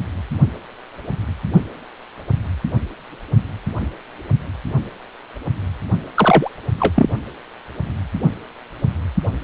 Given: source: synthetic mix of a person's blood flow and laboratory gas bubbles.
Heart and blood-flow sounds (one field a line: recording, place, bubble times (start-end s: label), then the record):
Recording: Doppler ultrasound of blood flow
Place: precordium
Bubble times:
6.14-6.49 s: bubbles
6.79-7.09 s: bubbles
From the record:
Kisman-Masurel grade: 213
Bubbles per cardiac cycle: several, 3 to 8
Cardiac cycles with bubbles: 1 to 10%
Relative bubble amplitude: loud (0.450 to 0.775)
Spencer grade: 1 (occasional bubble signal discernible with the cardiac motion signal, with majority of cardiac periods free of bubbles)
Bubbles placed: only in the low amplitude regions of the cardiac cycle